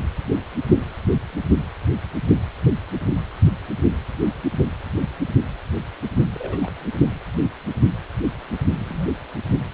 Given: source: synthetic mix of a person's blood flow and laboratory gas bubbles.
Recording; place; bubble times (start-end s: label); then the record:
Doppler ultrasound of blood flow; precordium
6.33-6.70 s: bubbles
8.79-9.08 s: bubbles
From the record:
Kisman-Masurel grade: 121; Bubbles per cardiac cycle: 1 to 2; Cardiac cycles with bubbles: 10 to 50%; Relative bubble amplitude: barely perceptible (0.100 to 0.250); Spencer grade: 2 (many but less than half of the cardiac periods contain bubble signals, singularly or in groups); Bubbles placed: only in the low amplitude regions of the cardiac cycle